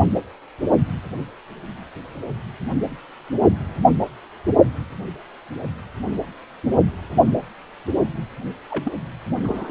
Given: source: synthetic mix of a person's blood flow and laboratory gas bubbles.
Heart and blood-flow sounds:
Doppler ultrasound of blood flow; precordium
8.70-8.92 s: bubbles
9.43-9.71 s: bubbles
From the record:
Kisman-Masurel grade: 211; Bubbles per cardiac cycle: several, 3 to 8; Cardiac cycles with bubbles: 1 to 10%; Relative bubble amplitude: barely perceptible (0.100 to 0.250); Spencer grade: 1 (occasional bubble signal discernible with the cardiac motion signal, with majority of cardiac periods free of bubbles); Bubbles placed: only in the low amplitude regions of the cardiac cycle

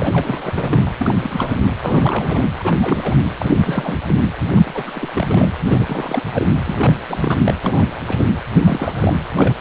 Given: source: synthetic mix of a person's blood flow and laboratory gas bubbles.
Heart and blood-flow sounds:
Doppler ultrasound of blood flow; precordium
0.00-0.90 s: bubbles
0.97-1.14 s: bubbles
1.22-1.56 s: bubbles
1.82-2.45 s: bubbles
2.59-2.74 s: bubbles
2.81-3.15 s: bubbles
3.38-3.53 s: bubbles
3.61-3.97 s: bubbles
4.08-4.16 s: bubbles
4.56-4.62 s: bubbles
4.65-5.08 s: bubbles
5.14-5.52 s: bubbles
5.67-6.23 s: bubbles
6.33-6.47 s: bubbles
6.64-7.00 s: bubbles
7.09-7.40 s: bubbles
7.46-7.54 s: bubbles
7.65-8.01 s: bubbles
8.07-8.24 s: bubbles
8.61-9.17 s: bubbles
9.34-9.54 s: bubbles
From the record:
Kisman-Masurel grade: 342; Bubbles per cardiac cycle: rolling drumbeat, 9 or more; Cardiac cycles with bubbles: 100%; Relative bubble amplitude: moderate (0.250 to 0.450); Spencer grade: 3 (all of the cardiac periods contain showers or single bubble signals, but not dominating or overriding the cardiac motion signals); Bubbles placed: anywhere in the cardiac cycle

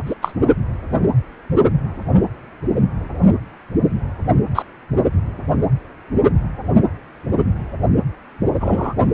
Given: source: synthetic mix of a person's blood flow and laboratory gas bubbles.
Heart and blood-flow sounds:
Doppler ultrasound of blood flow; precordium
0.05-0.14 s: bubbles
0.22-0.34 s: bubbles
4.55-4.62 s: bubbles
8.60-8.94 s: bubbles
From the record:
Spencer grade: 2 (many but less than half of the cardiac periods contain bubble signals, singularly or in groups); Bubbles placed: only in the low amplitude regions of the cardiac cycle

